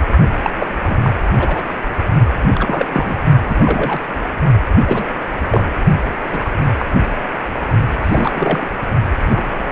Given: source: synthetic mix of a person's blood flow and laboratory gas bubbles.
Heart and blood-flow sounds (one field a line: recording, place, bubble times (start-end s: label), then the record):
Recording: Doppler ultrasound of blood flow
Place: precordium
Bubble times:
0.43-0.51 s: bubbles
0.59-0.67 s: bubbles
0.86-0.97 s: bubbles
1.03-1.10 s: bubbles
1.39-1.64 s: bubbles
2.42-2.51 s: bubbles
2.55-2.86 s: bubbles
2.92-3.18 s: bubbles
3.48-4.05 s: bubbles
4.87-5.06 s: bubbles
5.50-5.63 s: bubbles
6.31-6.40 s: bubbles
6.44-6.50 s: bubbles
6.79-6.85 s: bubbles
8.03-8.70 s: bubbles
9.26-9.42 s: bubbles
9.57-9.72 s: bubbles
From the record:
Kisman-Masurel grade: 232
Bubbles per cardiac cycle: several, 3 to 8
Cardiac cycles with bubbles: 50 to 99%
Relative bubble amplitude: moderate (0.250 to 0.450)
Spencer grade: 3 (all of the cardiac periods contain showers or single bubble signals, but not dominating or overriding the cardiac motion signals)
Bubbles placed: only in the low amplitude regions of the cardiac cycle